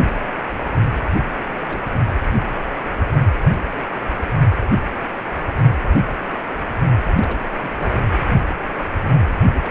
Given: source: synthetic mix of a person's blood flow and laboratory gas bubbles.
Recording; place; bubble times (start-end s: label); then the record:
Doppler ultrasound of blood flow; precordium
1.44-1.50 s: bubbles
1.68-1.82 s: bubbles
1.93-2.14 s: bubbles
7.14-7.39 s: bubbles
7.61-8.06 s: bubbles
9.54-9.71 s: bubbles
From the record:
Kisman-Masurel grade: 221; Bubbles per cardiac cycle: several, 3 to 8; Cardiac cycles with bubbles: 10 to 50%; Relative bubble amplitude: barely perceptible (0.100 to 0.250); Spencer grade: 2 (many but less than half of the cardiac periods contain bubble signals, singularly or in groups); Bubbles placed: anywhere in the cardiac cycle